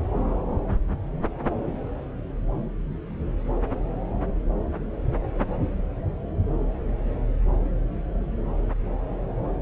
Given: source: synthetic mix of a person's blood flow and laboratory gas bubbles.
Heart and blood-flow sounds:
Doppler ultrasound of blood flow; subclavian vein
no bubbles
From the record:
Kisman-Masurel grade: 000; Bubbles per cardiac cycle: 0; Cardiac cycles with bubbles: 0%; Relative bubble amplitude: no bubbles discernible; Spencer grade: 0 (complete lack of bubble signals)

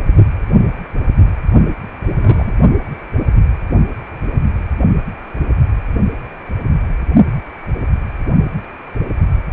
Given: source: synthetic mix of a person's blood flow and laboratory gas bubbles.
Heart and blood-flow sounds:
Doppler ultrasound of blood flow; precordium
2.10-2.57 s: bubbles
From the record:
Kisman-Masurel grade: 212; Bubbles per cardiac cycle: several, 3 to 8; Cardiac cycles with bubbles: 1 to 10%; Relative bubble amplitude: moderate (0.250 to 0.450); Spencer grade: 1 (occasional bubble signal discernible with the cardiac motion signal, with majority of cardiac periods free of bubbles); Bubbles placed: only in the low amplitude regions of the cardiac cycle

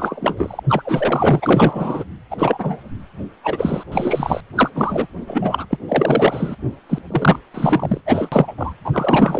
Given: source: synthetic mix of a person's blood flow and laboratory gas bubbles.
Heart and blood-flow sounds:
Doppler ultrasound of blood flow; precordium
0.00-0.60 s: bubbles
0.68-2.04 s: bubbles
2.30-2.81 s: bubbles
3.44-3.84 s: bubbles
3.92-4.40 s: bubbles
4.55-4.69 s: bubbles
4.75-5.06 s: bubbles
5.26-5.66 s: bubbles
5.70-5.76 s: bubbles
5.88-6.55 s: bubbles
6.89-6.98 s: bubbles
7.10-7.39 s: bubbles
7.54-8.01 s: bubbles
8.05-8.53 s: bubbles
8.58-8.73 s: bubbles
8.85-9.40 s: bubbles
From the record:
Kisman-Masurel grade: 333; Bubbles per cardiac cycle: rolling drumbeat, 9 or more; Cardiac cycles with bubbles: 50 to 99%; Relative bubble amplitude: loud (0.450 to 0.775); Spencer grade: 3 (all of the cardiac periods contain showers or single bubble signals, but not dominating or overriding the cardiac motion signals); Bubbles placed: anywhere in the cardiac cycle

